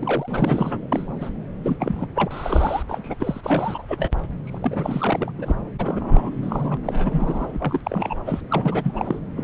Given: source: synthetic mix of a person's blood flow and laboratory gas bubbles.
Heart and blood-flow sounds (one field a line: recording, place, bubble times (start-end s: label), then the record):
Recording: Doppler ultrasound of blood flow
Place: subclavian vein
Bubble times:
0.00-0.89 s: bubbles
0.92-1.18 s: bubbles
1.21-1.29 s: bubbles
1.63-1.77 s: bubbles
1.79-2.06 s: bubbles
2.15-2.83 s: bubbles
2.89-3.85 s: bubbles
3.88-4.11 s: bubbles
4.44-5.32 s: bubbles
5.38-5.55 s: bubbles
5.79-6.78 s: bubbles
6.83-7.81 s: bubbles
7.84-8.40 s: bubbles
8.49-8.91 s: bubbles
8.94-9.19 s: bubbles
9.38-9.44 s: bubbles
From the record:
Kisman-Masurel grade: 342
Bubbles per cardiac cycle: rolling drumbeat, 9 or more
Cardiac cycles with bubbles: 100%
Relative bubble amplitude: moderate (0.250 to 0.450)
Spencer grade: 3 (all of the cardiac periods contain showers or single bubble signals, but not dominating or overriding the cardiac motion signals)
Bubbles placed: anywhere in the cardiac cycle